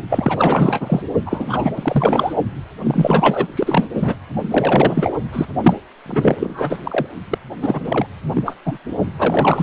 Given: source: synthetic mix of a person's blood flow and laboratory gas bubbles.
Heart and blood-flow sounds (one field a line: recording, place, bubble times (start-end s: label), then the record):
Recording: Doppler ultrasound of blood flow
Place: precordium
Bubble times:
0.09-1.02 s: bubbles
1.25-1.71 s: bubbles
1.75-2.35 s: bubbles
2.83-3.47 s: bubbles
3.55-3.86 s: bubbles
3.94-4.15 s: bubbles
4.51-5.15 s: bubbles
5.33-5.47 s: bubbles
5.63-5.74 s: bubbles
6.06-6.36 s: bubbles
6.40-6.78 s: bubbles
6.83-7.07 s: bubbles
7.30-7.39 s: bubbles
7.61-8.06 s: bubbles
8.33-8.56 s: bubbles
8.65-8.78 s: bubbles
9.18-9.63 s: bubbles
From the record:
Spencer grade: 4 (maximum detectable bubble signal sounding continuously throughout systole and diastole of every cardiac period, and overriding the amplitude of the normal cardiac signals)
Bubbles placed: only in the low amplitude regions of the cardiac cycle